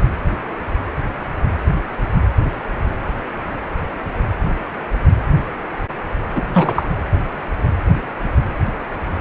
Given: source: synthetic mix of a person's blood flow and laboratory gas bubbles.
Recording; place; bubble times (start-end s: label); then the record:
Doppler ultrasound of blood flow; precordium
6.35-6.42 s: bubbles
6.53-6.83 s: bubbles
From the record:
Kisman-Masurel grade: 212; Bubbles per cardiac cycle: several, 3 to 8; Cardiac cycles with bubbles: 1 to 10%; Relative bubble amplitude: moderate (0.250 to 0.450); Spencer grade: 1 (occasional bubble signal discernible with the cardiac motion signal, with majority of cardiac periods free of bubbles); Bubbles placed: anywhere in the cardiac cycle